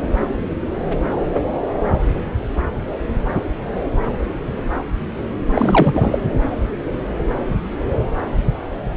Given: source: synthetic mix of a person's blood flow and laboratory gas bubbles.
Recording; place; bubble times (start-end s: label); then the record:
Doppler ultrasound of blood flow; subclavian vein
5.54-6.18 s: bubbles
From the record:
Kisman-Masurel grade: 223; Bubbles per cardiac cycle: several, 3 to 8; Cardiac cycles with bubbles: 10 to 50%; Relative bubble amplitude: loud (0.450 to 0.775); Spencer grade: 2 (many but less than half of the cardiac periods contain bubble signals, singularly or in groups); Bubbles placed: anywhere in the cardiac cycle